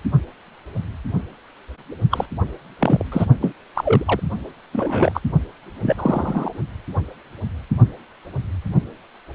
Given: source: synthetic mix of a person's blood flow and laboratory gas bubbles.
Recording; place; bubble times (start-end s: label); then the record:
Doppler ultrasound of blood flow; precordium
2.10-2.26 s: bubbles
2.79-3.03 s: bubbles
3.12-3.27 s: bubbles
3.42-3.52 s: bubbles
3.75-4.20 s: bubbles
4.72-5.21 s: bubbles
5.82-6.50 s: bubbles
From the record:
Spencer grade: 3 (all of the cardiac periods contain showers or single bubble signals, but not dominating or overriding the cardiac motion signals); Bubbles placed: only in the low amplitude regions of the cardiac cycle